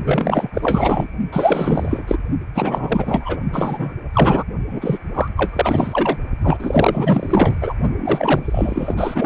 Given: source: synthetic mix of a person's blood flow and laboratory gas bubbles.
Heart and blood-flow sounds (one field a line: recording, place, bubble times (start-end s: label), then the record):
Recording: Doppler ultrasound of blood flow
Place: precordium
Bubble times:
0.05-0.51 s: bubbles
0.53-1.07 s: bubbles
1.33-2.04 s: bubbles
2.08-2.17 s: bubbles
2.54-3.40 s: bubbles
3.52-3.96 s: bubbles
4.13-4.43 s: bubbles
4.69-4.98 s: bubbles
5.14-5.28 s: bubbles
5.36-6.19 s: bubbles
6.42-7.54 s: bubbles
7.60-7.74 s: bubbles
7.96-9.26 s: bubbles
From the record:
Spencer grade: 4 (maximum detectable bubble signal sounding continuously throughout systole and diastole of every cardiac period, and overriding the amplitude of the normal cardiac signals)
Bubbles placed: only in the low amplitude regions of the cardiac cycle